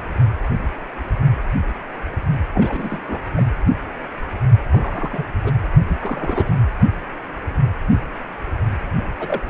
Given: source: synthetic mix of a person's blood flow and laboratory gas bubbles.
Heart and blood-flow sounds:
Doppler ultrasound of blood flow; precordium
2.54-3.29 s: bubbles
3.36-3.45 s: bubbles
4.71-5.25 s: bubbles
5.43-5.54 s: bubbles
5.88-5.96 s: bubbles
5.99-6.55 s: bubbles
9.19-9.40 s: bubbles
From the record:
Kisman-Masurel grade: 221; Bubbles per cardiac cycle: several, 3 to 8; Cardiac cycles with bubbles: 10 to 50%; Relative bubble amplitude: barely perceptible (0.100 to 0.250); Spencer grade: 2 (many but less than half of the cardiac periods contain bubble signals, singularly or in groups); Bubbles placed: anywhere in the cardiac cycle

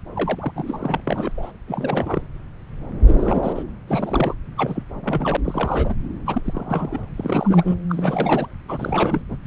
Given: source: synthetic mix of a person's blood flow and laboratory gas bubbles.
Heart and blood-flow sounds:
Doppler ultrasound of blood flow; subclavian vein
0.15-0.52 s: bubbles
0.55-1.00 s: bubbles
1.07-1.31 s: bubbles
1.37-1.51 s: bubbles
1.68-2.27 s: bubbles
3.07-3.62 s: bubbles
3.87-4.34 s: bubbles
4.57-4.83 s: bubbles
4.94-5.37 s: bubbles
5.44-5.95 s: bubbles
6.25-6.42 s: bubbles
6.45-7.00 s: bubbles
7.16-7.75 s: bubbles
7.89-8.46 s: bubbles
8.68-9.22 s: bubbles
9.29-9.37 s: bubbles
9.43-9.47 s: bubbles
From the record:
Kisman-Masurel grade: 332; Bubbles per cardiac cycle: rolling drumbeat, 9 or more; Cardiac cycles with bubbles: 50 to 99%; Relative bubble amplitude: moderate (0.250 to 0.450); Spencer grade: 3 (all of the cardiac periods contain showers or single bubble signals, but not dominating or overriding the cardiac motion signals); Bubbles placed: anywhere in the cardiac cycle

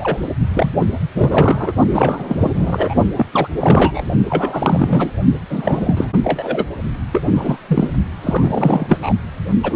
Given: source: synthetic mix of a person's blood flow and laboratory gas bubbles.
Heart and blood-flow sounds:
Doppler ultrasound of blood flow; precordium
0.00-0.18 s: bubbles
0.53-0.72 s: bubbles
0.78-0.86 s: bubbles
1.18-1.73 s: bubbles
1.91-2.25 s: bubbles
2.28-2.36 s: bubbles
2.40-2.95 s: bubbles
3.16-3.27 s: bubbles
3.32-3.48 s: bubbles
3.60-4.02 s: bubbles
4.29-5.10 s: bubbles
5.49-6.08 s: bubbles
6.23-6.65 s: bubbles
7.12-7.92 s: bubbles
8.23-9.14 s: bubbles
9.63-9.76 s: bubbles
From the record:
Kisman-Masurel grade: 343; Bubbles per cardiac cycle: rolling drumbeat, 9 or more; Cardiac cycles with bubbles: 100%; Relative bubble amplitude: loud (0.450 to 0.775); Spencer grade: 3 (all of the cardiac periods contain showers or single bubble signals, but not dominating or overriding the cardiac motion signals); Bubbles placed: only in the low amplitude regions of the cardiac cycle

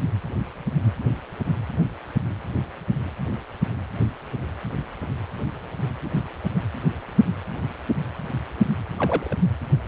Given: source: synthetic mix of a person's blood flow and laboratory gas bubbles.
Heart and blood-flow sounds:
Doppler ultrasound of blood flow; precordium
8.99-9.35 s: bubbles
From the record:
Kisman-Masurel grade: 111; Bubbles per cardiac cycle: 1 to 2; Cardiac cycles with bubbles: 1 to 10%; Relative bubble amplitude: barely perceptible (0.100 to 0.250); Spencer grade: 1 (occasional bubble signal discernible with the cardiac motion signal, with majority of cardiac periods free of bubbles); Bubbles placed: anywhere in the cardiac cycle

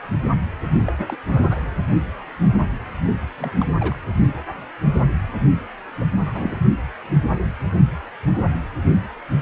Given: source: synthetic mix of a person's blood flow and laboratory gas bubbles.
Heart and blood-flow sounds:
Doppler ultrasound of blood flow; precordium
0.86-0.93 s: bubbles
0.98-1.05 s: bubbles
1.09-1.17 s: bubbles
1.28-1.67 s: bubbles
3.36-3.66 s: bubbles
3.75-3.98 s: bubbles
6.00-6.05 s: bubbles
6.21-6.60 s: bubbles
From the record:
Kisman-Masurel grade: 221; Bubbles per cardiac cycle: several, 3 to 8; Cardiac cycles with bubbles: 10 to 50%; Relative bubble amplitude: barely perceptible (0.100 to 0.250); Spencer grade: 2 (many but less than half of the cardiac periods contain bubble signals, singularly or in groups); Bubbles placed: only in the low amplitude regions of the cardiac cycle

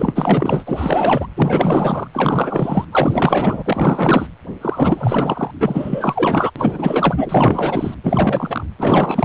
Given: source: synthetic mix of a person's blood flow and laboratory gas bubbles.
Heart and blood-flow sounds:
Doppler ultrasound of blood flow; precordium
0.00-1.27 s: bubbles
1.36-2.08 s: bubbles
2.13-2.85 s: bubbles
2.91-3.62 s: bubbles
3.65-4.27 s: bubbles
4.61-5.51 s: bubbles
5.59-6.51 s: bubbles
6.55-7.94 s: bubbles
8.03-8.66 s: bubbles
8.78-9.25 s: bubbles
From the record:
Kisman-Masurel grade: 444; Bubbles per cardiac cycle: continuous sound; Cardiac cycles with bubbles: 100%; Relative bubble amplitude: maximal (0.775 to 0.999); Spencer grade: 4 (maximum detectable bubble signal sounding continuously throughout systole and diastole of every cardiac period, and overriding the amplitude of the normal cardiac signals); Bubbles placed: anywhere in the cardiac cycle

